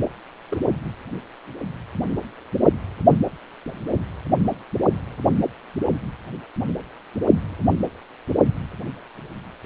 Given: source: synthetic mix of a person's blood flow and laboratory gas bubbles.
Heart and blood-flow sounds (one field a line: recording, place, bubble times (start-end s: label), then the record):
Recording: Doppler ultrasound of blood flow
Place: precordium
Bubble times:
0.50-0.56 s: bubbles
From the record:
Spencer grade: 1 (occasional bubble signal discernible with the cardiac motion signal, with majority of cardiac periods free of bubbles)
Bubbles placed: only in the low amplitude regions of the cardiac cycle